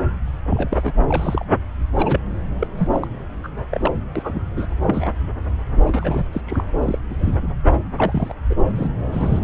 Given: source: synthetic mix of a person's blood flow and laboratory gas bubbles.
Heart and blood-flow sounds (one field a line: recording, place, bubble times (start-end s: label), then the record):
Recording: Doppler ultrasound of blood flow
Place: subclavian vein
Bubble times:
0.44-0.93 s: bubbles
1.08-1.44 s: bubbles
1.94-2.20 s: bubbles
2.59-2.67 s: bubbles
2.77-2.88 s: bubbles
2.92-3.08 s: bubbles
3.44-3.48 s: bubbles
3.71-3.92 s: bubbles
4.16-4.45 s: bubbles
4.57-4.67 s: bubbles
4.87-5.08 s: bubbles
5.82-6.25 s: bubbles
6.33-6.41 s: bubbles
6.46-6.63 s: bubbles
6.81-6.99 s: bubbles
7.10-7.14 s: bubbles
7.18-7.48 s: bubbles
7.98-8.33 s: bubbles
8.49-8.55 s: bubbles
8.75-8.88 s: bubbles
9.11-9.40 s: bubbles
From the record:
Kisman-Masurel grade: 242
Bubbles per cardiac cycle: several, 3 to 8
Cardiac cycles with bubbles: 100%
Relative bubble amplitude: moderate (0.250 to 0.450)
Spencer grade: 3 (all of the cardiac periods contain showers or single bubble signals, but not dominating or overriding the cardiac motion signals)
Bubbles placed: anywhere in the cardiac cycle